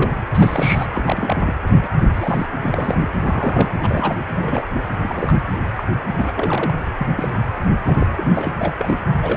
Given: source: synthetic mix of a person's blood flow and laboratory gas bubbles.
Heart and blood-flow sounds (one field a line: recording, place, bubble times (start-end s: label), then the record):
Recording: Doppler ultrasound of blood flow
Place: precordium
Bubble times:
0.00-0.11 s: bubbles
0.33-0.86 s: bubbles
0.93-1.55 s: bubbles
1.82-1.89 s: bubbles
1.99-2.08 s: bubbles
2.14-2.46 s: bubbles
2.62-2.99 s: bubbles
3.21-3.71 s: bubbles
3.81-4.17 s: bubbles
4.33-4.63 s: bubbles
5.02-5.33 s: bubbles
5.75-5.83 s: bubbles
6.10-6.31 s: bubbles
6.36-6.73 s: bubbles
6.98-7.08 s: bubbles
7.17-7.33 s: bubbles
7.86-8.07 s: bubbles
8.16-8.48 s: bubbles
8.58-8.74 s: bubbles
8.79-8.97 s: bubbles
9.22-9.37 s: bubbles
From the record:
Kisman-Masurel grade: 242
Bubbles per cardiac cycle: several, 3 to 8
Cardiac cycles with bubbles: 100%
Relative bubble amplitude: moderate (0.250 to 0.450)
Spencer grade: 3 (all of the cardiac periods contain showers or single bubble signals, but not dominating or overriding the cardiac motion signals)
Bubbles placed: anywhere in the cardiac cycle